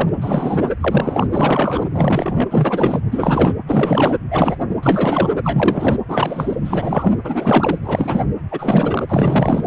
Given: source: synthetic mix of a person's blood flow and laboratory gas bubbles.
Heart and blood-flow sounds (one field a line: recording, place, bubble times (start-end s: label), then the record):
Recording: Doppler ultrasound of blood flow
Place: precordium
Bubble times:
0.00-0.10 s: bubbles
0.16-0.71 s: bubbles
0.80-1.85 s: bubbles
1.94-3.00 s: bubbles
3.11-3.54 s: bubbles
3.66-4.16 s: bubbles
4.30-4.56 s: bubbles
4.82-5.30 s: bubbles
5.43-5.96 s: bubbles
6.07-6.56 s: bubbles
6.64-7.15 s: bubbles
7.24-7.78 s: bubbles
7.81-8.25 s: bubbles
8.51-9.67 s: bubbles
From the record:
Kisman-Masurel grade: 343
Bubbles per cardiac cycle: rolling drumbeat, 9 or more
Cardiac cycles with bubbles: 100%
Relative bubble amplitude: loud (0.450 to 0.775)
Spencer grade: 3 (all of the cardiac periods contain showers or single bubble signals, but not dominating or overriding the cardiac motion signals)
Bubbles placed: anywhere in the cardiac cycle